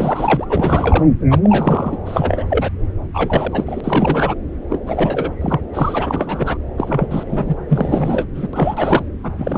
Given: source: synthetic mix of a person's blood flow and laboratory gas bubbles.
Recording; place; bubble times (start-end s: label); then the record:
Doppler ultrasound of blood flow; subclavian vein
0.00-0.45 s: bubbles
0.49-1.06 s: bubbles
1.30-1.40 s: bubbles
1.43-1.97 s: bubbles
2.05-2.46 s: bubbles
2.49-2.70 s: bubbles
3.14-3.80 s: bubbles
3.83-4.35 s: bubbles
4.70-4.81 s: bubbles
4.86-5.31 s: bubbles
5.41-5.61 s: bubbles
5.73-6.58 s: bubbles
6.77-7.07 s: bubbles
7.10-7.56 s: bubbles
7.68-8.27 s: bubbles
8.35-8.48 s: bubbles
8.53-9.04 s: bubbles
9.23-9.31 s: bubbles
9.38-9.58 s: bubbles
From the record:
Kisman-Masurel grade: 343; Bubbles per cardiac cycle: rolling drumbeat, 9 or more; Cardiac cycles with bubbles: 100%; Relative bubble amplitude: loud (0.450 to 0.775); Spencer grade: 3 (all of the cardiac periods contain showers or single bubble signals, but not dominating or overriding the cardiac motion signals); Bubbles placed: anywhere in the cardiac cycle